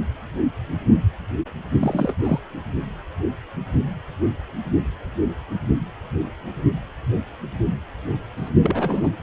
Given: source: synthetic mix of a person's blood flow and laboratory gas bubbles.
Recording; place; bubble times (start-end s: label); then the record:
Doppler ultrasound of blood flow; precordium
1.81-2.14 s: bubbles
2.24-2.40 s: bubbles
8.37-8.50 s: bubbles
8.62-9.12 s: bubbles
From the record:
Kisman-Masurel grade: 222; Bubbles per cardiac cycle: several, 3 to 8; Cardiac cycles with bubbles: 10 to 50%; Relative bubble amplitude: moderate (0.250 to 0.450); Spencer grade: 2 (many but less than half of the cardiac periods contain bubble signals, singularly or in groups); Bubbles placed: anywhere in the cardiac cycle